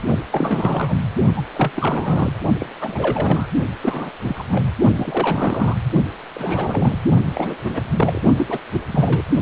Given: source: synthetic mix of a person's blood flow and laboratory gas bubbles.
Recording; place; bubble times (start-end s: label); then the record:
Doppler ultrasound of blood flow; precordium
0.08-0.20 s: bubbles
0.32-0.99 s: bubbles
1.36-1.42 s: bubbles
1.55-1.72 s: bubbles
1.76-2.33 s: bubbles
2.59-2.66 s: bubbles
2.81-3.46 s: bubbles
3.82-4.11 s: bubbles
4.24-4.44 s: bubbles
4.49-4.72 s: bubbles
4.96-5.76 s: bubbles
6.33-6.99 s: bubbles
7.33-7.55 s: bubbles
7.64-7.83 s: bubbles
7.97-8.21 s: bubbles
8.38-8.58 s: bubbles
8.72-8.81 s: bubbles
8.91-9.23 s: bubbles
From the record:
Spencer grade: 3 (all of the cardiac periods contain showers or single bubble signals, but not dominating or overriding the cardiac motion signals); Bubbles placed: only in the low amplitude regions of the cardiac cycle